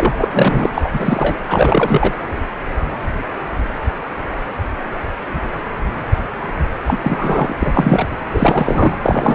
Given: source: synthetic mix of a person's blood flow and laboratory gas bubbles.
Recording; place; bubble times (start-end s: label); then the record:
Doppler ultrasound of blood flow; precordium
0.00-0.12 s: bubbles
0.18-0.29 s: bubbles
0.32-0.71 s: bubbles
0.74-1.38 s: bubbles
1.49-2.14 s: bubbles
6.86-7.52 s: bubbles
7.59-8.07 s: bubbles
8.33-8.98 s: bubbles
9.02-9.35 s: bubbles
From the record:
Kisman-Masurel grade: 333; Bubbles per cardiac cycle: rolling drumbeat, 9 or more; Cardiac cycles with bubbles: 50 to 99%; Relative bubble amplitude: loud (0.450 to 0.775); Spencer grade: 3 (all of the cardiac periods contain showers or single bubble signals, but not dominating or overriding the cardiac motion signals); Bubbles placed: anywhere in the cardiac cycle